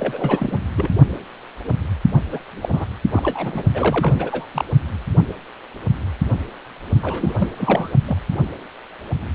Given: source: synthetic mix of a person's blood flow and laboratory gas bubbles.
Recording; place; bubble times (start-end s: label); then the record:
Doppler ultrasound of blood flow; precordium
0.00-0.58 s: bubbles
0.76-0.91 s: bubbles
2.31-2.40 s: bubbles
2.62-2.69 s: bubbles
2.73-2.86 s: bubbles
3.11-3.63 s: bubbles
3.74-4.46 s: bubbles
4.53-4.64 s: bubbles
7.01-7.90 s: bubbles
8.07-8.17 s: bubbles
From the record:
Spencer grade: 3 (all of the cardiac periods contain showers or single bubble signals, but not dominating or overriding the cardiac motion signals); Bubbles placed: only in the low amplitude regions of the cardiac cycle